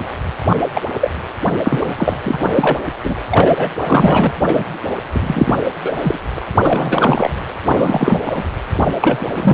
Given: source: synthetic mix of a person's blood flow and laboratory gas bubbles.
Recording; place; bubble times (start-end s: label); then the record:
Doppler ultrasound of blood flow; precordium
0.49-0.56 s: bubbles
0.74-0.81 s: bubbles
1.00-1.10 s: bubbles
1.65-1.92 s: bubbles
1.98-2.18 s: bubbles
2.26-2.50 s: bubbles
2.55-2.78 s: bubbles
3.03-3.15 s: bubbles
3.29-3.75 s: bubbles
3.79-4.32 s: bubbles
4.48-4.66 s: bubbles
5.11-5.58 s: bubbles
5.83-5.94 s: bubbles
5.96-6.19 s: bubbles
6.37-6.39 s: bubbles
6.64-7.30 s: bubbles
7.66-8.49 s: bubbles
9.00-9.54 s: bubbles
From the record:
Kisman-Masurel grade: 343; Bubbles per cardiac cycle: rolling drumbeat, 9 or more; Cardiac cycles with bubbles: 100%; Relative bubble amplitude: loud (0.450 to 0.775); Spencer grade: 3 (all of the cardiac periods contain showers or single bubble signals, but not dominating or overriding the cardiac motion signals); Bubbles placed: anywhere in the cardiac cycle